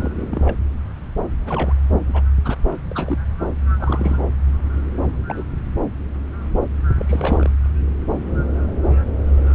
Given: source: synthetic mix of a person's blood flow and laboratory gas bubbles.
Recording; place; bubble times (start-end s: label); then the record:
Doppler ultrasound of blood flow; subclavian vein
0.00-0.11 s: bubbles
0.15-0.26 s: bubbles
0.29-0.55 s: bubbles
1.40-1.73 s: bubbles
2.08-2.23 s: bubbles
2.44-2.56 s: bubbles
2.67-2.73 s: bubbles
2.90-3.17 s: bubbles
3.79-4.25 s: bubbles
5.05-5.21 s: bubbles
5.28-5.43 s: bubbles
6.98-7.51 s: bubbles
From the record:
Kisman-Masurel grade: 221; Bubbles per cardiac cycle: several, 3 to 8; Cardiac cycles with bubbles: 10 to 50%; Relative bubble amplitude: barely perceptible (0.100 to 0.250); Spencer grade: 2 (many but less than half of the cardiac periods contain bubble signals, singularly or in groups); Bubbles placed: anywhere in the cardiac cycle